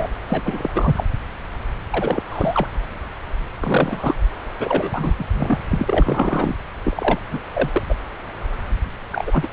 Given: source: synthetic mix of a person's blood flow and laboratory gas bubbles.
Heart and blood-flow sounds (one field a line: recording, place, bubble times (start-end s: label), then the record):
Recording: Doppler ultrasound of blood flow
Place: subclavian vein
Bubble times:
0.00-0.10 s: bubbles
0.29-0.71 s: bubbles
0.74-1.04 s: bubbles
1.92-2.23 s: bubbles
2.29-2.67 s: bubbles
3.60-4.14 s: bubbles
4.59-5.14 s: bubbles
5.18-5.25 s: bubbles
5.34-5.58 s: bubbles
5.71-6.55 s: bubbles
6.84-7.19 s: bubbles
7.31-7.39 s: bubbles
7.54-7.69 s: bubbles
7.72-7.83 s: bubbles
7.89-7.95 s: bubbles
9.12-9.48 s: bubbles
From the record:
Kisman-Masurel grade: 332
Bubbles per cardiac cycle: rolling drumbeat, 9 or more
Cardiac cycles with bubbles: 50 to 99%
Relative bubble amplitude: moderate (0.250 to 0.450)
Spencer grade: 3 (all of the cardiac periods contain showers or single bubble signals, but not dominating or overriding the cardiac motion signals)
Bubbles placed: anywhere in the cardiac cycle